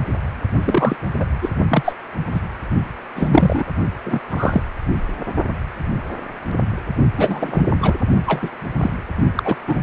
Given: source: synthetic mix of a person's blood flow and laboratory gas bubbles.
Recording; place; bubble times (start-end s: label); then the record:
Doppler ultrasound of blood flow; precordium
0.62-0.96 s: bubbles
1.20-1.25 s: bubbles
1.42-1.49 s: bubbles
1.68-1.93 s: bubbles
2.33-2.41 s: bubbles
3.15-3.64 s: bubbles
4.05-4.20 s: bubbles
4.30-4.64 s: bubbles
7.17-7.66 s: bubbles
7.80-7.95 s: bubbles
8.26-8.51 s: bubbles
8.80-8.91 s: bubbles
9.35-9.56 s: bubbles
9.67-9.76 s: bubbles
From the record:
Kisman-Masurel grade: 233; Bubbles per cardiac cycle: several, 3 to 8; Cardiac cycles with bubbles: 50 to 99%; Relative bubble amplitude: loud (0.450 to 0.775); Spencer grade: 3 (all of the cardiac periods contain showers or single bubble signals, but not dominating or overriding the cardiac motion signals); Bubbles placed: only in the low amplitude regions of the cardiac cycle